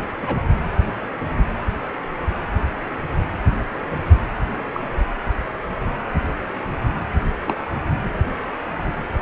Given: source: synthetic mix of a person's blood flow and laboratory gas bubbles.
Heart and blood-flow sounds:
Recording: Doppler ultrasound of blood flow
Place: precordium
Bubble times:
0.21-0.40 s: bubbles
4.73-4.82 s: bubbles
7.47-7.55 s: bubbles
From the record:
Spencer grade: 2 (many but less than half of the cardiac periods contain bubble signals, singularly or in groups)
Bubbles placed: anywhere in the cardiac cycle

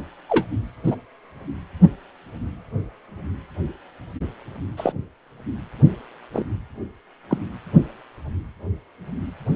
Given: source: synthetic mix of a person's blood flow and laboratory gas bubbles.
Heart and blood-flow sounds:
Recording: Doppler ultrasound of blood flow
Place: precordium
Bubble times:
0.29-0.45 s: bubbles
0.84-0.96 s: bubbles
4.76-4.92 s: bubbles
6.33-6.45 s: bubbles
7.29-7.38 s: bubbles
From the record:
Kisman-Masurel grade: 123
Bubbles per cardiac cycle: 1 to 2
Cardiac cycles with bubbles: 10 to 50%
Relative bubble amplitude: loud (0.450 to 0.775)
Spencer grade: 2 (many but less than half of the cardiac periods contain bubble signals, singularly or in groups)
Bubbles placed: anywhere in the cardiac cycle

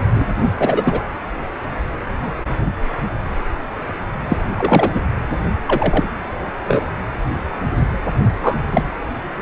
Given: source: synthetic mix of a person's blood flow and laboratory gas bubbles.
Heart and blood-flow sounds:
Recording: Doppler ultrasound of blood flow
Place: precordium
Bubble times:
0.14-0.24 s: bubbles
0.58-1.03 s: bubbles
4.29-4.38 s: bubbles
4.55-4.91 s: bubbles
4.93-5.00 s: bubbles
5.66-6.10 s: bubbles
6.67-6.84 s: bubbles
8.16-8.63 s: bubbles
8.71-8.83 s: bubbles
From the record:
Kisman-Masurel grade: 223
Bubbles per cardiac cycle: several, 3 to 8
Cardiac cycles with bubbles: 10 to 50%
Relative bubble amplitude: loud (0.450 to 0.775)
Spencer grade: 2 (many but less than half of the cardiac periods contain bubble signals, singularly or in groups)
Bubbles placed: anywhere in the cardiac cycle

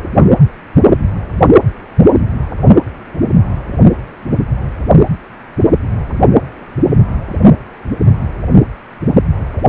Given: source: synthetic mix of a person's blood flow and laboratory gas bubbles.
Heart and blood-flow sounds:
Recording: Doppler ultrasound of blood flow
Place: precordium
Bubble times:
9.56-9.61 s: bubbles
From the record:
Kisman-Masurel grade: 122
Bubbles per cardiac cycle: 1 to 2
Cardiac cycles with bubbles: 10 to 50%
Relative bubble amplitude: moderate (0.250 to 0.450)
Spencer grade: 2 (many but less than half of the cardiac periods contain bubble signals, singularly or in groups)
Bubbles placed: only in the low amplitude regions of the cardiac cycle

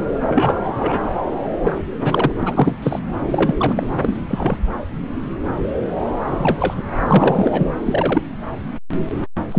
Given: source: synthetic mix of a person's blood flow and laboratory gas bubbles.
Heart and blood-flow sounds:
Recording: Doppler ultrasound of blood flow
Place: subclavian vein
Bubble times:
0.28-0.61 s: bubbles
0.64-0.70 s: bubbles
0.77-1.02 s: bubbles
1.61-1.82 s: bubbles
1.97-2.32 s: bubbles
2.39-2.79 s: bubbles
2.82-2.99 s: bubbles
3.30-3.87 s: bubbles
4.02-4.15 s: bubbles
4.27-4.56 s: bubbles
6.27-6.83 s: bubbles
7.00-7.68 s: bubbles
7.86-8.22 s: bubbles
9.51-9.59 s: bubbles
From the record:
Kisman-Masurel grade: 233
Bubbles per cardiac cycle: several, 3 to 8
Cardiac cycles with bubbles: 50 to 99%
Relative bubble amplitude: loud (0.450 to 0.775)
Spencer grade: 3 (all of the cardiac periods contain showers or single bubble signals, but not dominating or overriding the cardiac motion signals)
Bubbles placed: anywhere in the cardiac cycle

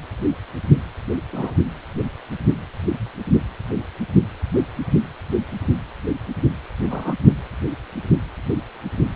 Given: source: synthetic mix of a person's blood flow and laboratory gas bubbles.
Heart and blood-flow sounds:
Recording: Doppler ultrasound of blood flow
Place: precordium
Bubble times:
1.32-1.53 s: bubbles
6.90-7.14 s: bubbles
From the record:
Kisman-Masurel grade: 122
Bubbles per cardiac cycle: 1 to 2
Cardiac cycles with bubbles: 10 to 50%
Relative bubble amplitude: moderate (0.250 to 0.450)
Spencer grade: 2 (many but less than half of the cardiac periods contain bubble signals, singularly or in groups)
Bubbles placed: anywhere in the cardiac cycle

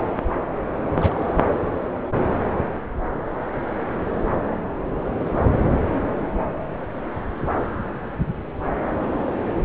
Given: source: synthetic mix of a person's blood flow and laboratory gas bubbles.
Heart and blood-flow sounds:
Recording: Doppler ultrasound of blood flow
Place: subclavian vein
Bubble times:
1.00-1.20 s: bubbles
1.43-1.48 s: bubbles
From the record:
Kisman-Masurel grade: 211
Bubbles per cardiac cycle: several, 3 to 8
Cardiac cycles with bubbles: 1 to 10%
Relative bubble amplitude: barely perceptible (0.100 to 0.250)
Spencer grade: 1 (occasional bubble signal discernible with the cardiac motion signal, with majority of cardiac periods free of bubbles)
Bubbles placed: anywhere in the cardiac cycle

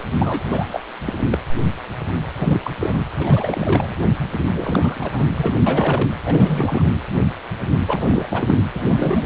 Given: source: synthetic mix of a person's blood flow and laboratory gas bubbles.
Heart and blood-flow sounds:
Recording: Doppler ultrasound of blood flow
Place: precordium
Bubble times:
0.19-0.44 s: bubbles
0.51-0.81 s: bubbles
1.05-1.13 s: bubbles
1.31-1.38 s: bubbles
2.35-2.60 s: bubbles
2.63-2.71 s: bubbles
2.77-2.98 s: bubbles
3.18-3.96 s: bubbles
4.54-5.25 s: bubbles
5.36-5.53 s: bubbles
5.66-6.09 s: bubbles
6.25-6.85 s: bubbles
7.86-8.27 s: bubbles
8.29-8.57 s: bubbles
8.74-9.26 s: bubbles
From the record:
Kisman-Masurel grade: 332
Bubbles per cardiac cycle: rolling drumbeat, 9 or more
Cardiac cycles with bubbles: 50 to 99%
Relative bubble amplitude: moderate (0.250 to 0.450)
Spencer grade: 3 (all of the cardiac periods contain showers or single bubble signals, but not dominating or overriding the cardiac motion signals)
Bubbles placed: anywhere in the cardiac cycle

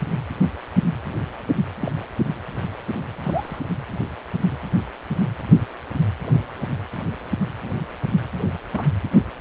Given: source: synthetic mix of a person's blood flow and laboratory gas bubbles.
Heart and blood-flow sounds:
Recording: Doppler ultrasound of blood flow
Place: precordium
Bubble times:
1.79-1.92 s: bubbles
3.23-3.59 s: bubbles
8.72-8.85 s: bubbles
From the record:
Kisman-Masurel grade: 121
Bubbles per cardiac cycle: 1 to 2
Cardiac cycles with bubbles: 10 to 50%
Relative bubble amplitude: barely perceptible (0.100 to 0.250)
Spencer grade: 2 (many but less than half of the cardiac periods contain bubble signals, singularly or in groups)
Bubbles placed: anywhere in the cardiac cycle

